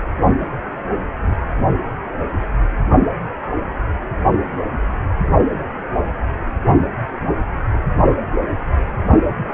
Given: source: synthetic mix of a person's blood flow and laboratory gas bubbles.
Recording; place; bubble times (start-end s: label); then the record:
Doppler ultrasound of blood flow; precordium
0.40-0.47 s: bubbles
1.22-1.36 s: bubbles
From the record:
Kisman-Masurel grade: 111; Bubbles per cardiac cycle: 1 to 2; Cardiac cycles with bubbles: 1 to 10%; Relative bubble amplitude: barely perceptible (0.100 to 0.250); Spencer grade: 1 (occasional bubble signal discernible with the cardiac motion signal, with majority of cardiac periods free of bubbles); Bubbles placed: only in the low amplitude regions of the cardiac cycle